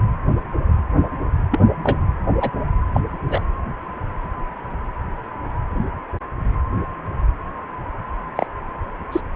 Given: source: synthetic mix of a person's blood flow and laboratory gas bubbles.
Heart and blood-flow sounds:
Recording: Doppler ultrasound of blood flow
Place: precordium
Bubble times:
1.51-1.59 s: bubbles
1.83-1.99 s: bubbles
2.40-2.50 s: bubbles
2.93-3.00 s: bubbles
3.28-3.45 s: bubbles
8.36-8.46 s: bubbles
9.12-9.21 s: bubbles
From the record:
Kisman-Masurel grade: 122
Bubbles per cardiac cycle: 1 to 2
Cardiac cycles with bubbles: 10 to 50%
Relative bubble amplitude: moderate (0.250 to 0.450)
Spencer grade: 2 (many but less than half of the cardiac periods contain bubble signals, singularly or in groups)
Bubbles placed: anywhere in the cardiac cycle

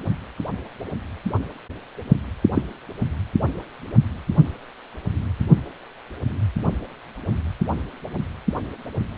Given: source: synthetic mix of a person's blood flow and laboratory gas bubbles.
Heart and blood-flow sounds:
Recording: Doppler ultrasound of blood flow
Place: precordium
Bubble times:
2.55-2.62 s: bubbles
From the record:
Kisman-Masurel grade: 113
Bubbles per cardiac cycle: 1 to 2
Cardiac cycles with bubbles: 1 to 10%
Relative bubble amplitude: loud (0.450 to 0.775)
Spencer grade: 1 (occasional bubble signal discernible with the cardiac motion signal, with majority of cardiac periods free of bubbles)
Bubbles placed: only in the low amplitude regions of the cardiac cycle

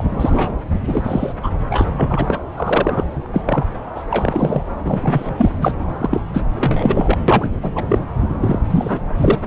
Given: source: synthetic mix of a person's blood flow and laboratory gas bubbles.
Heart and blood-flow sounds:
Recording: Doppler ultrasound of blood flow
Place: subclavian vein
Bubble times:
0.00-0.03 s: bubbles
0.11-0.52 s: bubbles
0.86-1.33 s: bubbles
1.42-1.51 s: bubbles
1.70-1.91 s: bubbles
1.97-2.39 s: bubbles
2.56-3.04 s: bubbles
3.24-3.27 s: bubbles
3.33-3.42 s: bubbles
3.46-3.65 s: bubbles
3.95-4.03 s: bubbles
4.10-4.62 s: bubbles
4.84-5.34 s: bubbles
5.38-5.50 s: bubbles
5.62-5.73 s: bubbles
5.98-6.21 s: bubbles
6.33-6.42 s: bubbles
6.56-7.17 s: bubbles
7.28-7.50 s: bubbles
7.62-7.71 s: bubbles
7.75-7.84 s: bubbles
7.88-7.99 s: bubbles
8.41-8.60 s: bubbles
8.70-9.01 s: bubbles
9.17-9.38 s: bubbles
From the record:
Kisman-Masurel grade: 343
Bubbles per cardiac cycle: rolling drumbeat, 9 or more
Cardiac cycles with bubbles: 100%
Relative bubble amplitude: loud (0.450 to 0.775)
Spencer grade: 3 (all of the cardiac periods contain showers or single bubble signals, but not dominating or overriding the cardiac motion signals)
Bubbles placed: anywhere in the cardiac cycle

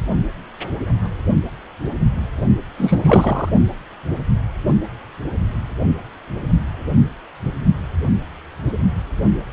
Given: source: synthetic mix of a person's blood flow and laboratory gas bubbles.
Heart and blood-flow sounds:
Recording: Doppler ultrasound of blood flow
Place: precordium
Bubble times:
2.77-3.49 s: bubbles
From the record:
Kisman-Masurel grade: 213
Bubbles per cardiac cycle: several, 3 to 8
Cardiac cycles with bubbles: 1 to 10%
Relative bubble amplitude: loud (0.450 to 0.775)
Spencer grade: 1 (occasional bubble signal discernible with the cardiac motion signal, with majority of cardiac periods free of bubbles)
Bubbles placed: only in the low amplitude regions of the cardiac cycle

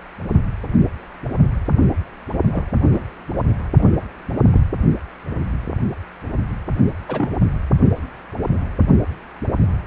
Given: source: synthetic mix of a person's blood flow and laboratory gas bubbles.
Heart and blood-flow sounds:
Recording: Doppler ultrasound of blood flow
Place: precordium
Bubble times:
2.52-2.65 s: bubbles
2.92-3.05 s: bubbles
3.78-3.90 s: bubbles
4.51-4.61 s: bubbles
7.08-7.29 s: bubbles
From the record:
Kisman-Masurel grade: 122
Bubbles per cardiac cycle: 1 to 2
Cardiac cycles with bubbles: 10 to 50%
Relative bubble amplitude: moderate (0.250 to 0.450)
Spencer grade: 2 (many but less than half of the cardiac periods contain bubble signals, singularly or in groups)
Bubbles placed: only in the low amplitude regions of the cardiac cycle

